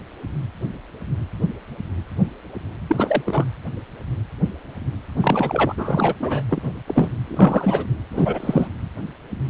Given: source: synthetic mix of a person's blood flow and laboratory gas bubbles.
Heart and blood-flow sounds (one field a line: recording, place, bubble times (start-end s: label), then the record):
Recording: Doppler ultrasound of blood flow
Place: precordium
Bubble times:
2.88-3.21 s: bubbles
3.25-3.46 s: bubbles
5.21-5.74 s: bubbles
5.77-6.14 s: bubbles
6.20-6.43 s: bubbles
6.49-6.72 s: bubbles
6.87-7.09 s: bubbles
7.27-7.85 s: bubbles
8.11-8.68 s: bubbles
From the record:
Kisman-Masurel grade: 223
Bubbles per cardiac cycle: several, 3 to 8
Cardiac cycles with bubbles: 10 to 50%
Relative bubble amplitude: loud (0.450 to 0.775)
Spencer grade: 2 (many but less than half of the cardiac periods contain bubble signals, singularly or in groups)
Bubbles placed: anywhere in the cardiac cycle